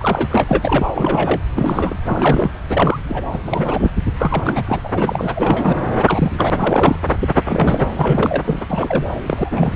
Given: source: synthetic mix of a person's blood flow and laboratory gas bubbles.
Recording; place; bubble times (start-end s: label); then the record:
Doppler ultrasound of blood flow; subclavian vein
0.00-0.44 s: bubbles
0.48-0.89 s: bubbles
0.95-1.42 s: bubbles
1.54-1.96 s: bubbles
2.05-2.50 s: bubbles
2.68-3.00 s: bubbles
3.08-3.23 s: bubbles
3.32-3.39 s: bubbles
3.47-3.92 s: bubbles
4.19-4.64 s: bubbles
4.67-4.80 s: bubbles
4.84-5.76 s: bubbles
6.07-6.32 s: bubbles
6.38-6.96 s: bubbles
7.20-7.42 s: bubbles
7.45-7.91 s: bubbles
7.96-8.60 s: bubbles
8.70-9.07 s: bubbles
9.26-9.76 s: bubbles
From the record:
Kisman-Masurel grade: 342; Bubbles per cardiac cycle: rolling drumbeat, 9 or more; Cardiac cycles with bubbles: 100%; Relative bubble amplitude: moderate (0.250 to 0.450); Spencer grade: 3 (all of the cardiac periods contain showers or single bubble signals, but not dominating or overriding the cardiac motion signals); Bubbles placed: anywhere in the cardiac cycle